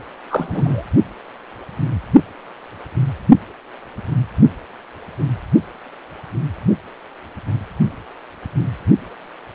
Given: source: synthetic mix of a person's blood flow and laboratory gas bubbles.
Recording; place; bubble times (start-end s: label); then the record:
Doppler ultrasound of blood flow; precordium
0.29-0.84 s: bubbles
From the record:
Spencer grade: 1 (occasional bubble signal discernible with the cardiac motion signal, with majority of cardiac periods free of bubbles); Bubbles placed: only in the low amplitude regions of the cardiac cycle